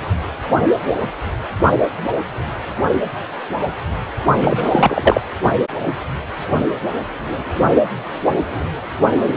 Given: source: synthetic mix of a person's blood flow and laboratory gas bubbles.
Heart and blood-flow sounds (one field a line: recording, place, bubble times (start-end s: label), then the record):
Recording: Doppler ultrasound of blood flow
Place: precordium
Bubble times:
4.41-5.21 s: bubbles
From the record:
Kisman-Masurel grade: 213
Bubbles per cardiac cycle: several, 3 to 8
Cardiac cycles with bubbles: 1 to 10%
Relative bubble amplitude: loud (0.450 to 0.775)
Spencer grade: 1 (occasional bubble signal discernible with the cardiac motion signal, with majority of cardiac periods free of bubbles)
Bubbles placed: only in the low amplitude regions of the cardiac cycle